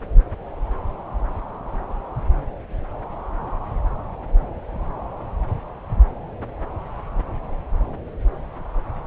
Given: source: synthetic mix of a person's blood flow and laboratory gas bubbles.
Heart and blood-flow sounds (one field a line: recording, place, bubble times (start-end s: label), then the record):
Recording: Doppler ultrasound of blood flow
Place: subclavian vein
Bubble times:
no bubbles
From the record:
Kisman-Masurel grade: 000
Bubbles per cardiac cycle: 0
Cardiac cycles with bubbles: 0%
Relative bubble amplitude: no bubbles discernible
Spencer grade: 0 (complete lack of bubble signals)